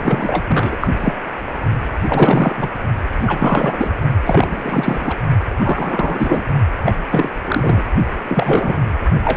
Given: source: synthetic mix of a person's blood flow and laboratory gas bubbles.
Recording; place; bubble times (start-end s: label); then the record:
Doppler ultrasound of blood flow; precordium
0.02-0.43 s: bubbles
0.48-0.77 s: bubbles
0.81-0.88 s: bubbles
1.00-1.13 s: bubbles
2.08-2.69 s: bubbles
3.18-3.90 s: bubbles
4.25-5.17 s: bubbles
5.56-6.43 s: bubbles
6.85-6.95 s: bubbles
7.10-7.29 s: bubbles
7.46-7.83 s: bubbles
8.29-8.77 s: bubbles
9.25-9.37 s: bubbles
From the record:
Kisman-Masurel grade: 343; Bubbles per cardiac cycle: rolling drumbeat, 9 or more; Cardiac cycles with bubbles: 100%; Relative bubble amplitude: loud (0.450 to 0.775); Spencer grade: 3 (all of the cardiac periods contain showers or single bubble signals, but not dominating or overriding the cardiac motion signals); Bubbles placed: only in the low amplitude regions of the cardiac cycle